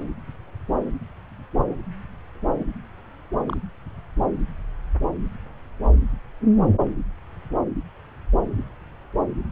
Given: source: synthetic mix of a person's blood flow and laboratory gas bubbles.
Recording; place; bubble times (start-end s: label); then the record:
Doppler ultrasound of blood flow; subclavian vein
3.49-3.57 s: bubbles
From the record:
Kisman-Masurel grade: 111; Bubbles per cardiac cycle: 1 to 2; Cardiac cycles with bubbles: 1 to 10%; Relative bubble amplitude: barely perceptible (0.100 to 0.250); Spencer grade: 1 (occasional bubble signal discernible with the cardiac motion signal, with majority of cardiac periods free of bubbles); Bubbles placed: anywhere in the cardiac cycle